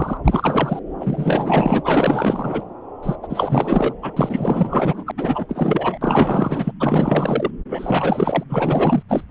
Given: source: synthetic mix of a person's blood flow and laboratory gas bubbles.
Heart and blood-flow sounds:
Doppler ultrasound of blood flow; subclavian vein
0.00-0.17 s: bubbles
0.24-0.79 s: bubbles
1.00-2.64 s: bubbles
3.02-3.16 s: bubbles
3.23-3.94 s: bubbles
4.02-5.12 s: bubbles
5.17-5.98 s: bubbles
6.01-6.71 s: bubbles
6.79-7.50 s: bubbles
7.69-8.44 s: bubbles
8.49-9.03 s: bubbles
9.09-9.24 s: bubbles
From the record:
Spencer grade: 4 (maximum detectable bubble signal sounding continuously throughout systole and diastole of every cardiac period, and overriding the amplitude of the normal cardiac signals); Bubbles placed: anywhere in the cardiac cycle

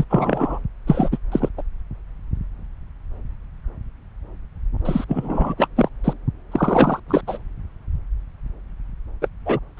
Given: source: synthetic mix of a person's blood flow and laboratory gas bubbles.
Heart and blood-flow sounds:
Doppler ultrasound of blood flow; subclavian vein
0.00-0.04 s: bubbles
0.09-0.58 s: bubbles
0.86-1.09 s: bubbles
1.11-1.18 s: bubbles
1.31-1.49 s: bubbles
1.57-1.62 s: bubbles
4.85-5.04 s: bubbles
5.08-5.54 s: bubbles
5.57-5.68 s: bubbles
5.77-5.89 s: bubbles
6.04-6.13 s: bubbles
6.52-7.00 s: bubbles
7.08-7.23 s: bubbles
7.27-7.38 s: bubbles
9.21-9.28 s: bubbles
9.46-9.59 s: bubbles
9.77-9.80 s: bubbles
From the record:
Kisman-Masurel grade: 233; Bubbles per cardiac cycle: several, 3 to 8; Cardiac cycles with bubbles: 50 to 99%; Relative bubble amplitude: loud (0.450 to 0.775); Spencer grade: 3 (all of the cardiac periods contain showers or single bubble signals, but not dominating or overriding the cardiac motion signals); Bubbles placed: anywhere in the cardiac cycle

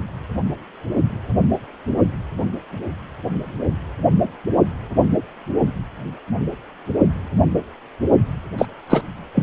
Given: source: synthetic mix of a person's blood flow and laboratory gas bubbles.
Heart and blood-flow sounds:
Doppler ultrasound of blood flow; precordium
8.57-8.65 s: bubbles
8.89-9.02 s: bubbles
9.35-9.43 s: bubbles
From the record:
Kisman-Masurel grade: 223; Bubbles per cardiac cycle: several, 3 to 8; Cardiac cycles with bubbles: 10 to 50%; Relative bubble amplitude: loud (0.450 to 0.775); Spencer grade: 2 (many but less than half of the cardiac periods contain bubble signals, singularly or in groups); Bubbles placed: only in the low amplitude regions of the cardiac cycle

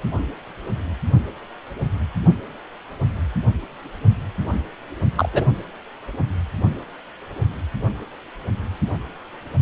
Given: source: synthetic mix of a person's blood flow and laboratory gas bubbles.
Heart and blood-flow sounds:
Doppler ultrasound of blood flow; precordium
5.15-5.29 s: bubbles
5.33-5.46 s: bubbles
From the record:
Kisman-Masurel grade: 112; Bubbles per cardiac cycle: 1 to 2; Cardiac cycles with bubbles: 1 to 10%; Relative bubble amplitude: moderate (0.250 to 0.450); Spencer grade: 1 (occasional bubble signal discernible with the cardiac motion signal, with majority of cardiac periods free of bubbles); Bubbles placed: anywhere in the cardiac cycle

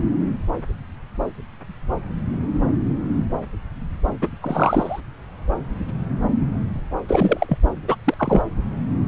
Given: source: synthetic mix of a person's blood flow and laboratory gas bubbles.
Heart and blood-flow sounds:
Doppler ultrasound of blood flow; subclavian vein
4.21-4.28 s: bubbles
4.42-5.00 s: bubbles
7.08-7.58 s: bubbles
7.88-7.96 s: bubbles
8.04-8.14 s: bubbles
8.17-8.42 s: bubbles
From the record:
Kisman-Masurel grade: 223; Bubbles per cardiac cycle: several, 3 to 8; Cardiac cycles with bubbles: 10 to 50%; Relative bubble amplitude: loud (0.450 to 0.775); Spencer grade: 2 (many but less than half of the cardiac periods contain bubble signals, singularly or in groups); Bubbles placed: anywhere in the cardiac cycle

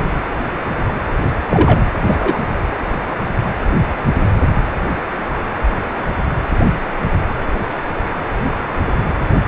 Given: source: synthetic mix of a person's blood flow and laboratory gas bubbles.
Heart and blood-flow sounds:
Doppler ultrasound of blood flow; precordium
1.49-1.79 s: bubbles
2.08-2.37 s: bubbles
From the record:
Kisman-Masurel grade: 123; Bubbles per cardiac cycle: 1 to 2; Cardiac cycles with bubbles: 10 to 50%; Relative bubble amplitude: loud (0.450 to 0.775); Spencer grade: 2 (many but less than half of the cardiac periods contain bubble signals, singularly or in groups); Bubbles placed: anywhere in the cardiac cycle

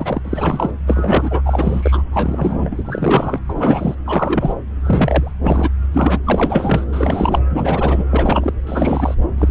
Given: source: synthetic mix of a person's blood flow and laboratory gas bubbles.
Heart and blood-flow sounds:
Doppler ultrasound of blood flow; subclavian vein
0.00-0.20 s: bubbles
0.24-0.71 s: bubbles
0.87-1.41 s: bubbles
1.45-2.02 s: bubbles
2.13-2.82 s: bubbles
2.85-3.41 s: bubbles
3.48-3.95 s: bubbles
4.05-4.55 s: bubbles
4.85-5.32 s: bubbles
5.43-5.70 s: bubbles
5.92-6.19 s: bubbles
6.24-6.85 s: bubbles
6.92-7.41 s: bubbles
7.49-8.04 s: bubbles
8.10-8.53 s: bubbles
8.67-9.15 s: bubbles
9.38-9.51 s: bubbles
From the record:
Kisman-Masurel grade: 343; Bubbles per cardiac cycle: rolling drumbeat, 9 or more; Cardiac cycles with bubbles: 100%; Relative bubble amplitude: loud (0.450 to 0.775); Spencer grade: 3 (all of the cardiac periods contain showers or single bubble signals, but not dominating or overriding the cardiac motion signals); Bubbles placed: anywhere in the cardiac cycle

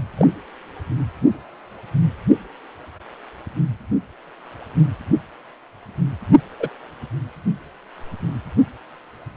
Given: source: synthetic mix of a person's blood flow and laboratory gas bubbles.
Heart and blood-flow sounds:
Doppler ultrasound of blood flow; precordium
0.17-0.28 s: bubbles
6.59-6.68 s: bubbles
From the record:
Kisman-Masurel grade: 122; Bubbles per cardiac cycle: 1 to 2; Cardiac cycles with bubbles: 10 to 50%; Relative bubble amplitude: moderate (0.250 to 0.450); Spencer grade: 2 (many but less than half of the cardiac periods contain bubble signals, singularly or in groups); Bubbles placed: only in the low amplitude regions of the cardiac cycle

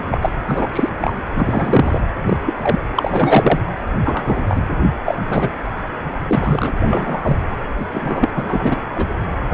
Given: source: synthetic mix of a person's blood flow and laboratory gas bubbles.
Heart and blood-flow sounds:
Doppler ultrasound of blood flow; precordium
0.00-0.03 s: bubbles
0.11-0.30 s: bubbles
0.47-0.68 s: bubbles
0.72-0.89 s: bubbles
1.01-1.14 s: bubbles
1.35-2.01 s: bubbles
2.26-2.38 s: bubbles
2.45-2.54 s: bubbles
2.62-2.79 s: bubbles
2.95-3.60 s: bubbles
4.04-4.42 s: bubbles
4.49-4.62 s: bubbles
5.05-5.17 s: bubbles
5.29-5.50 s: bubbles
6.30-6.72 s: bubbles
6.88-7.37 s: bubbles
7.79-7.86 s: bubbles
7.92-8.29 s: bubbles
8.35-8.80 s: bubbles
8.96-9.06 s: bubbles
9.50-9.54 s: bubbles
From the record:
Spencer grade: 3 (all of the cardiac periods contain showers or single bubble signals, but not dominating or overriding the cardiac motion signals); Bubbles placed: anywhere in the cardiac cycle

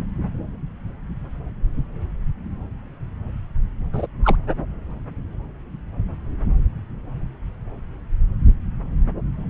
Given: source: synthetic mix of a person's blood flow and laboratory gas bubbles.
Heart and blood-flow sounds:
Doppler ultrasound of blood flow; subclavian vein
3.92-4.07 s: bubbles
4.23-4.36 s: bubbles
From the record:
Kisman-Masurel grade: 112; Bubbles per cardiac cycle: 1 to 2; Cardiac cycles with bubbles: 1 to 10%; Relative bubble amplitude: moderate (0.250 to 0.450); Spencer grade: 1 (occasional bubble signal discernible with the cardiac motion signal, with majority of cardiac periods free of bubbles); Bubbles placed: anywhere in the cardiac cycle

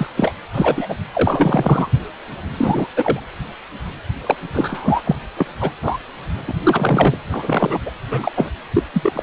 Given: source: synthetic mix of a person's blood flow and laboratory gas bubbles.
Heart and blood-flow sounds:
Doppler ultrasound of blood flow; precordium
0.00-0.07 s: bubbles
0.16-0.34 s: bubbles
0.54-0.97 s: bubbles
1.13-1.89 s: bubbles
2.58-2.87 s: bubbles
2.96-3.20 s: bubbles
4.26-4.37 s: bubbles
4.54-5.01 s: bubbles
5.04-5.16 s: bubbles
5.37-5.46 s: bubbles
5.61-5.71 s: bubbles
5.83-5.98 s: bubbles
6.47-6.54 s: bubbles
6.63-7.17 s: bubbles
7.31-7.79 s: bubbles
7.86-7.91 s: bubbles
8.11-8.31 s: bubbles
8.37-8.50 s: bubbles
8.73-8.83 s: bubbles
8.94-9.23 s: bubbles
From the record:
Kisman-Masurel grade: 233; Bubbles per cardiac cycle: several, 3 to 8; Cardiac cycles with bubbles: 50 to 99%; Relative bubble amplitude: loud (0.450 to 0.775); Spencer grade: 3 (all of the cardiac periods contain showers or single bubble signals, but not dominating or overriding the cardiac motion signals); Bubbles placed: anywhere in the cardiac cycle

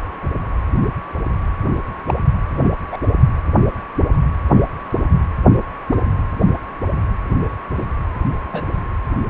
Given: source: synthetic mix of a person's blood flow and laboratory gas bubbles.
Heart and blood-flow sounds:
Doppler ultrasound of blood flow; precordium
2.07-2.14 s: bubbles
2.54-2.70 s: bubbles
2.90-2.97 s: bubbles
5.92-6.01 s: bubbles
7.75-7.89 s: bubbles
8.53-8.63 s: bubbles
From the record:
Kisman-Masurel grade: 122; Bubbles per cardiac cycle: 1 to 2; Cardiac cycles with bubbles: 10 to 50%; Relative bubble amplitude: moderate (0.250 to 0.450); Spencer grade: 2 (many but less than half of the cardiac periods contain bubble signals, singularly or in groups); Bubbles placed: anywhere in the cardiac cycle

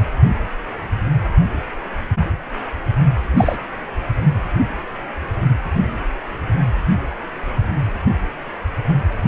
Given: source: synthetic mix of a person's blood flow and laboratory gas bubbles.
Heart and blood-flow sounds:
Doppler ultrasound of blood flow; precordium
3.37-3.56 s: bubbles
From the record:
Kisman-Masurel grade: 123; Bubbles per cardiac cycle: 1 to 2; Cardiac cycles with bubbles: 10 to 50%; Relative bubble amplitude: loud (0.450 to 0.775); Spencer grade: 2 (many but less than half of the cardiac periods contain bubble signals, singularly or in groups); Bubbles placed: only in the low amplitude regions of the cardiac cycle

